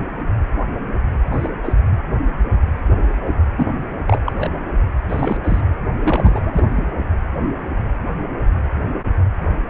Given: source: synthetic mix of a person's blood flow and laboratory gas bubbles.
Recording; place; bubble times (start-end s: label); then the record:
Doppler ultrasound of blood flow; precordium
1.31-1.50 s: bubbles
1.63-1.73 s: bubbles
3.56-3.74 s: bubbles
4.08-4.22 s: bubbles
4.25-4.32 s: bubbles
4.39-4.50 s: bubbles
5.09-5.37 s: bubbles
5.44-5.61 s: bubbles
6.02-6.92 s: bubbles
From the record:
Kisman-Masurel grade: 222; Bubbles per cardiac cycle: several, 3 to 8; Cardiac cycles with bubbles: 10 to 50%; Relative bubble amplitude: moderate (0.250 to 0.450); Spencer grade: 2 (many but less than half of the cardiac periods contain bubble signals, singularly or in groups); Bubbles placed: anywhere in the cardiac cycle